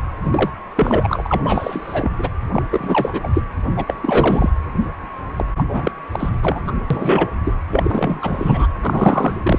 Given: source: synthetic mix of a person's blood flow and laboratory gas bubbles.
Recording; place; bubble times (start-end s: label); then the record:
Doppler ultrasound of blood flow; precordium
0.00-0.03 s: bubbles
0.24-0.50 s: bubbles
0.75-2.12 s: bubbles
2.18-2.29 s: bubbles
2.53-2.62 s: bubbles
2.70-3.29 s: bubbles
3.33-3.42 s: bubbles
3.76-3.85 s: bubbles
3.87-3.94 s: bubbles
4.01-4.50 s: bubbles
5.36-5.45 s: bubbles
5.57-5.92 s: bubbles
6.11-6.29 s: bubbles
6.41-6.71 s: bubbles
6.90-7.30 s: bubbles
7.44-7.54 s: bubbles
7.69-8.67 s: bubbles
8.82-9.37 s: bubbles
9.42-9.59 s: bubbles
From the record:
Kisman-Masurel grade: 343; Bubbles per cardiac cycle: rolling drumbeat, 9 or more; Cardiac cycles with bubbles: 100%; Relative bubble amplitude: loud (0.450 to 0.775); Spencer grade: 3 (all of the cardiac periods contain showers or single bubble signals, but not dominating or overriding the cardiac motion signals); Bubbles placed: anywhere in the cardiac cycle